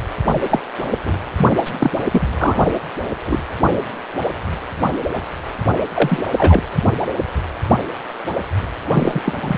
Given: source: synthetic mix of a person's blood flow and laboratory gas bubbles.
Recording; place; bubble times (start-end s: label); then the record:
Doppler ultrasound of blood flow; precordium
0.49-0.60 s: bubbles
1.05-1.16 s: bubbles
1.37-1.48 s: bubbles
1.65-1.72 s: bubbles
1.79-1.91 s: bubbles
1.96-2.00 s: bubbles
2.11-2.28 s: bubbles
2.39-2.71 s: bubbles
3.25-3.43 s: bubbles
5.94-6.24 s: bubbles
6.38-6.64 s: bubbles
8.88-9.22 s: bubbles
9.25-9.58 s: bubbles
From the record:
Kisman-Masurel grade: 233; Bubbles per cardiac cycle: several, 3 to 8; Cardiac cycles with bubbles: 50 to 99%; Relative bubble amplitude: loud (0.450 to 0.775); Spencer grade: 3 (all of the cardiac periods contain showers or single bubble signals, but not dominating or overriding the cardiac motion signals); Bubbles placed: anywhere in the cardiac cycle